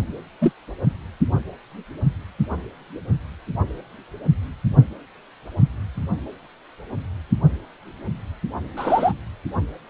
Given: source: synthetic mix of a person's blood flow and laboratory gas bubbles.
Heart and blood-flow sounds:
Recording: Doppler ultrasound of blood flow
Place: precordium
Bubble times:
0.41-0.52 s: bubbles
8.77-9.13 s: bubbles
From the record:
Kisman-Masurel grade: 123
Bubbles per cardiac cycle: 1 to 2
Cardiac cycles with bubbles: 10 to 50%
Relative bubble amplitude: loud (0.450 to 0.775)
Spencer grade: 2 (many but less than half of the cardiac periods contain bubble signals, singularly or in groups)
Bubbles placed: anywhere in the cardiac cycle

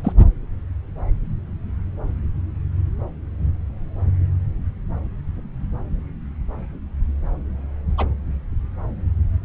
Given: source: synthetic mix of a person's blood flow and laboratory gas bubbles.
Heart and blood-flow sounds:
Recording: Doppler ultrasound of blood flow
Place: subclavian vein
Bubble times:
0.04-0.12 s: bubbles
7.98-8.07 s: bubbles
From the record:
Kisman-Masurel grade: 122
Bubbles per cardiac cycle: 1 to 2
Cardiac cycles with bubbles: 10 to 50%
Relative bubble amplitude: moderate (0.250 to 0.450)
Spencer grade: 2 (many but less than half of the cardiac periods contain bubble signals, singularly or in groups)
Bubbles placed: anywhere in the cardiac cycle

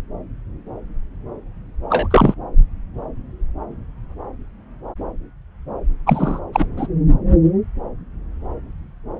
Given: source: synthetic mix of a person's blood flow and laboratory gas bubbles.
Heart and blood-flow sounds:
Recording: Doppler ultrasound of blood flow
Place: subclavian vein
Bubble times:
1.89-2.08 s: bubbles
2.10-2.34 s: bubbles
6.06-6.40 s: bubbles
6.53-6.67 s: bubbles
6.76-6.87 s: bubbles
From the record:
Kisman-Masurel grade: 223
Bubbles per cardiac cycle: several, 3 to 8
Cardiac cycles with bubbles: 10 to 50%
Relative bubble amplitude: loud (0.450 to 0.775)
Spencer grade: 2 (many but less than half of the cardiac periods contain bubble signals, singularly or in groups)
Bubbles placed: anywhere in the cardiac cycle

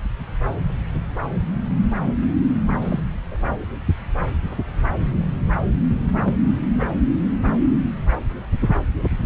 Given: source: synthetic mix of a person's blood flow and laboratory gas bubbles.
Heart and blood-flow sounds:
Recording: Doppler ultrasound of blood flow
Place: subclavian vein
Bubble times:
2.81-3.00 s: bubbles
3.31-3.56 s: bubbles
6.12-6.33 s: bubbles
6.80-6.87 s: bubbles
7.45-7.50 s: bubbles
9.22-9.26 s: bubbles
From the record:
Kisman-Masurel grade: 121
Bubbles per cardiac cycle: 1 to 2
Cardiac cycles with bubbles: 10 to 50%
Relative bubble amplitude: barely perceptible (0.100 to 0.250)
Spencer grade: 2 (many but less than half of the cardiac periods contain bubble signals, singularly or in groups)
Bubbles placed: anywhere in the cardiac cycle

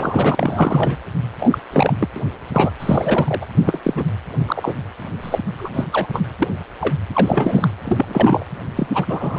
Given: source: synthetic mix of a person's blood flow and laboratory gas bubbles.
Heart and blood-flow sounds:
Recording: Doppler ultrasound of blood flow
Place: precordium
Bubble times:
0.00-0.97 s: bubbles
1.39-1.58 s: bubbles
1.72-1.96 s: bubbles
1.99-2.08 s: bubbles
2.16-2.21 s: bubbles
2.54-2.71 s: bubbles
2.80-3.46 s: bubbles
3.62-3.80 s: bubbles
3.84-4.04 s: bubbles
4.47-4.75 s: bubbles
5.22-5.38 s: bubbles
5.57-5.69 s: bubbles
5.73-5.84 s: bubbles
5.92-6.07 s: bubbles
6.12-6.23 s: bubbles
6.39-6.49 s: bubbles
6.80-6.95 s: bubbles
7.13-7.70 s: bubbles
7.85-8.44 s: bubbles
8.77-8.87 s: bubbles
8.94-9.39 s: bubbles
From the record:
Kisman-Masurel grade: 242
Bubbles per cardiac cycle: several, 3 to 8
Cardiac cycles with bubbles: 100%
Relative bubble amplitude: moderate (0.250 to 0.450)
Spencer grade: 3 (all of the cardiac periods contain showers or single bubble signals, but not dominating or overriding the cardiac motion signals)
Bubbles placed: anywhere in the cardiac cycle

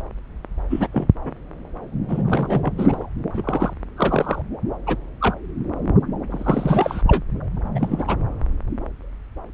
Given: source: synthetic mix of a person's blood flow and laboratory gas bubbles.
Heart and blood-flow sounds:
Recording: Doppler ultrasound of blood flow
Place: subclavian vein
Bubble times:
0.70-0.88 s: bubbles
0.92-1.07 s: bubbles
1.24-1.33 s: bubbles
2.08-2.72 s: bubbles
2.77-3.06 s: bubbles
3.33-3.73 s: bubbles
3.97-4.42 s: bubbles
4.87-4.96 s: bubbles
5.21-5.35 s: bubbles
6.30-7.02 s: bubbles
7.07-7.22 s: bubbles
7.75-8.17 s: bubbles
From the record:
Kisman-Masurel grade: 232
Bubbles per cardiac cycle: several, 3 to 8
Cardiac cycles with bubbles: 50 to 99%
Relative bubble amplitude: moderate (0.250 to 0.450)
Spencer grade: 3 (all of the cardiac periods contain showers or single bubble signals, but not dominating or overriding the cardiac motion signals)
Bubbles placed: anywhere in the cardiac cycle

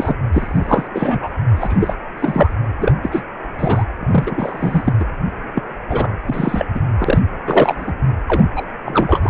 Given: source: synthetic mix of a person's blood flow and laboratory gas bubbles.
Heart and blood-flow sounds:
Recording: Doppler ultrasound of blood flow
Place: precordium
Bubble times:
0.00-0.15 s: bubbles
0.33-0.88 s: bubbles
0.93-1.28 s: bubbles
1.55-1.94 s: bubbles
2.17-2.53 s: bubbles
2.80-2.94 s: bubbles
3.03-3.23 s: bubbles
3.58-3.84 s: bubbles
4.00-4.93 s: bubbles
5.00-5.05 s: bubbles
5.55-5.63 s: bubbles
5.89-6.15 s: bubbles
6.27-6.66 s: bubbles
6.75-6.80 s: bubbles
6.99-7.20 s: bubbles
7.46-7.93 s: bubbles
8.27-8.44 s: bubbles
8.56-8.65 s: bubbles
8.85-9.19 s: bubbles
9.22-9.29 s: bubbles
From the record:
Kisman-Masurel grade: 343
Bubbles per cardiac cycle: rolling drumbeat, 9 or more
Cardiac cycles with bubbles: 100%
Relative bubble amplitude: loud (0.450 to 0.775)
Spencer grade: 3 (all of the cardiac periods contain showers or single bubble signals, but not dominating or overriding the cardiac motion signals)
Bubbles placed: anywhere in the cardiac cycle

